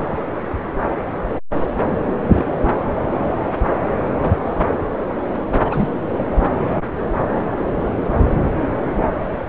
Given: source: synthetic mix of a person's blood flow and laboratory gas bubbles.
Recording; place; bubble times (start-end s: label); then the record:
Doppler ultrasound of blood flow; subclavian vein
2.04-2.45 s: bubbles
5.65-5.88 s: bubbles
From the record:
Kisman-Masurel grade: 122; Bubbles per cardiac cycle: 1 to 2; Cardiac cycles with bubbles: 10 to 50%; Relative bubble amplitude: moderate (0.250 to 0.450); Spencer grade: 2 (many but less than half of the cardiac periods contain bubble signals, singularly or in groups); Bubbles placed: anywhere in the cardiac cycle